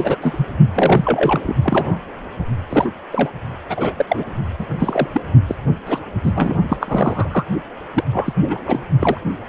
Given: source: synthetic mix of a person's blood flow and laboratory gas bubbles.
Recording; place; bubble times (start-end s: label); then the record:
Doppler ultrasound of blood flow; precordium
0.00-0.16 s: bubbles
0.21-0.47 s: bubbles
0.74-1.53 s: bubbles
1.62-1.99 s: bubbles
2.70-2.90 s: bubbles
3.12-3.30 s: bubbles
3.69-3.95 s: bubbles
3.97-4.05 s: bubbles
4.08-4.24 s: bubbles
4.58-4.66 s: bubbles
4.79-5.09 s: bubbles
5.12-5.21 s: bubbles
5.48-5.56 s: bubbles
5.86-5.99 s: bubbles
6.23-6.55 s: bubbles
6.68-6.77 s: bubbles
6.81-7.29 s: bubbles
7.32-7.45 s: bubbles
7.94-8.04 s: bubbles
8.12-8.34 s: bubbles
8.42-8.83 s: bubbles
8.99-9.18 s: bubbles
From the record:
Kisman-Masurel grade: 242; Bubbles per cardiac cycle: several, 3 to 8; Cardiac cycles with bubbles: 100%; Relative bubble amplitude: moderate (0.250 to 0.450); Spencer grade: 3 (all of the cardiac periods contain showers or single bubble signals, but not dominating or overriding the cardiac motion signals); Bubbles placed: only in the low amplitude regions of the cardiac cycle